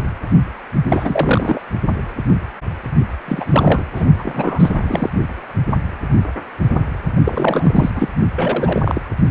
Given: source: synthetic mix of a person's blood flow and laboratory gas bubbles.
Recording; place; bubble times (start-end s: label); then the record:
Doppler ultrasound of blood flow; precordium
0.83-1.61 s: bubbles
3.27-3.44 s: bubbles
3.50-3.84 s: bubbles
3.95-4.05 s: bubbles
4.18-5.09 s: bubbles
7.24-7.90 s: bubbles
7.95-8.09 s: bubbles
8.36-9.01 s: bubbles
From the record:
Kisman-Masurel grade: 333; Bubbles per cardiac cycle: rolling drumbeat, 9 or more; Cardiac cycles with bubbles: 50 to 99%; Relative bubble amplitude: loud (0.450 to 0.775); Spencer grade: 3 (all of the cardiac periods contain showers or single bubble signals, but not dominating or overriding the cardiac motion signals); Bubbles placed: only in the low amplitude regions of the cardiac cycle